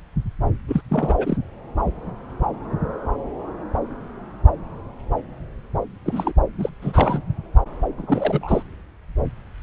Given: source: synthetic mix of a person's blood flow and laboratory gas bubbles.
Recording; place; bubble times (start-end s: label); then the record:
Doppler ultrasound of blood flow; subclavian vein
0.68-0.81 s: bubbles
0.90-1.37 s: bubbles
6.05-6.32 s: bubbles
6.58-6.70 s: bubbles
6.82-7.21 s: bubbles
7.98-8.62 s: bubbles
From the record:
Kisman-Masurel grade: 222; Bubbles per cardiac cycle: several, 3 to 8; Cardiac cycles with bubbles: 10 to 50%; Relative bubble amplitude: moderate (0.250 to 0.450); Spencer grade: 2 (many but less than half of the cardiac periods contain bubble signals, singularly or in groups); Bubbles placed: anywhere in the cardiac cycle